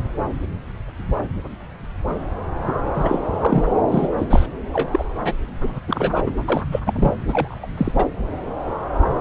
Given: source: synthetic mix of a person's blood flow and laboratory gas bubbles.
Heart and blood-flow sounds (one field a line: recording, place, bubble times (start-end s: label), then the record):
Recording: Doppler ultrasound of blood flow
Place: subclavian vein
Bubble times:
2.65-2.77 s: bubbles
2.94-3.65 s: bubbles
3.91-4.08 s: bubbles
4.17-4.26 s: bubbles
4.29-4.47 s: bubbles
4.73-5.04 s: bubbles
5.20-5.33 s: bubbles
5.60-5.80 s: bubbles
5.88-6.23 s: bubbles
6.25-6.35 s: bubbles
6.48-6.62 s: bubbles
6.71-6.80 s: bubbles
6.85-7.13 s: bubbles
7.27-7.66 s: bubbles
7.77-7.93 s: bubbles
7.96-8.06 s: bubbles
From the record:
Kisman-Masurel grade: 233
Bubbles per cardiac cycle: several, 3 to 8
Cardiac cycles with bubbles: 50 to 99%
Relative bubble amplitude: loud (0.450 to 0.775)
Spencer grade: 3 (all of the cardiac periods contain showers or single bubble signals, but not dominating or overriding the cardiac motion signals)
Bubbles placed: anywhere in the cardiac cycle